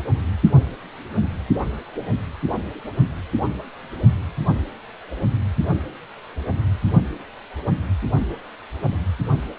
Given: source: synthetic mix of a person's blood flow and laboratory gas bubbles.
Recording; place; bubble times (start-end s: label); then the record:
Doppler ultrasound of blood flow; precordium
no bubbles
From the record:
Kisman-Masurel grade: 000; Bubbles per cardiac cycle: 0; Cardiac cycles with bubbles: 0%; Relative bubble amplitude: no bubbles discernible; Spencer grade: 0 (complete lack of bubble signals)